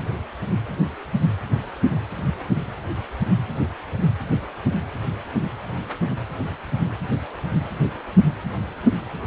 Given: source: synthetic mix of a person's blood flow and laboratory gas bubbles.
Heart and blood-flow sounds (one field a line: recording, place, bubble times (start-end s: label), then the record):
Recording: Doppler ultrasound of blood flow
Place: precordium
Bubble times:
no bubbles
From the record:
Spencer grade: 0 (complete lack of bubble signals)